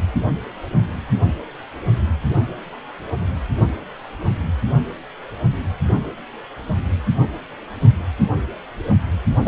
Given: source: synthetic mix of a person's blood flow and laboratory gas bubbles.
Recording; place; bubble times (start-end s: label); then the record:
Doppler ultrasound of blood flow; precordium
9.44-9.48 s: bubbles
From the record:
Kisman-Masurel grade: 212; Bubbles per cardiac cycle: several, 3 to 8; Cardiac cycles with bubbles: 1 to 10%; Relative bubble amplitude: moderate (0.250 to 0.450); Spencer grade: 1 (occasional bubble signal discernible with the cardiac motion signal, with majority of cardiac periods free of bubbles); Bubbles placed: only in the low amplitude regions of the cardiac cycle